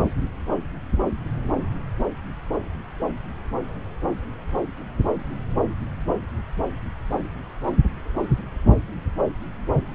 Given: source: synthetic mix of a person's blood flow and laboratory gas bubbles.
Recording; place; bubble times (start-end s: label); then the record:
Doppler ultrasound of blood flow; subclavian vein
no bubbles
From the record:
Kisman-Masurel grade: 000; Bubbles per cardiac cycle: 0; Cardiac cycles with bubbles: 0%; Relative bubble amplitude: no bubbles discernible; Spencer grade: 0 (complete lack of bubble signals)